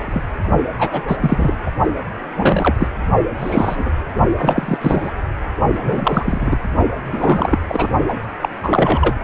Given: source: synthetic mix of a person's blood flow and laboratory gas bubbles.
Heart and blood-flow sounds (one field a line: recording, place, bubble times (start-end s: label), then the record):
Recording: Doppler ultrasound of blood flow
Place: precordium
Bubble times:
0.00-0.23 s: bubbles
0.78-1.17 s: bubbles
1.20-1.57 s: bubbles
1.66-1.71 s: bubbles
2.35-2.75 s: bubbles
2.79-2.88 s: bubbles
3.38-3.90 s: bubbles
4.36-4.78 s: bubbles
4.81-5.11 s: bubbles
5.75-6.57 s: bubbles
7.12-7.58 s: bubbles
7.69-7.88 s: bubbles
8.08-8.18 s: bubbles
8.41-8.49 s: bubbles
8.63-9.15 s: bubbles
From the record:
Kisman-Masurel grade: 243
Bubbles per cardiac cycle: several, 3 to 8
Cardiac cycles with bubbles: 100%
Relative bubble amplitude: loud (0.450 to 0.775)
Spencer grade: 3 (all of the cardiac periods contain showers or single bubble signals, but not dominating or overriding the cardiac motion signals)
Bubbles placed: only in the low amplitude regions of the cardiac cycle